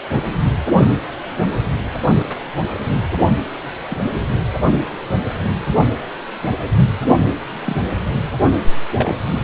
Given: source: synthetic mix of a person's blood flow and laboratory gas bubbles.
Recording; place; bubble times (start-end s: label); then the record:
Doppler ultrasound of blood flow; precordium
3.90-3.98 s: bubbles
7.64-7.76 s: bubbles
8.95-9.15 s: bubbles
From the record:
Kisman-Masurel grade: 122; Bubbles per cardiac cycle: 1 to 2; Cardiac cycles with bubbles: 10 to 50%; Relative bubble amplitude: moderate (0.250 to 0.450); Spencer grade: 2 (many but less than half of the cardiac periods contain bubble signals, singularly or in groups); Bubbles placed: anywhere in the cardiac cycle